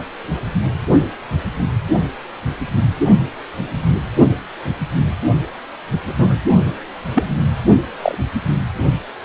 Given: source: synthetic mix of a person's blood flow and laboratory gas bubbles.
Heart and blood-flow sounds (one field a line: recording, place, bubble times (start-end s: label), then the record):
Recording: Doppler ultrasound of blood flow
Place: precordium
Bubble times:
6.05-6.38 s: bubbles
7.14-7.25 s: bubbles
7.29-7.37 s: bubbles
8.02-8.15 s: bubbles
From the record:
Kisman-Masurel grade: 123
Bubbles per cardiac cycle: 1 to 2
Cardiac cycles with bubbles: 10 to 50%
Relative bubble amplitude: loud (0.450 to 0.775)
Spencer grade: 2 (many but less than half of the cardiac periods contain bubble signals, singularly or in groups)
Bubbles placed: only in the low amplitude regions of the cardiac cycle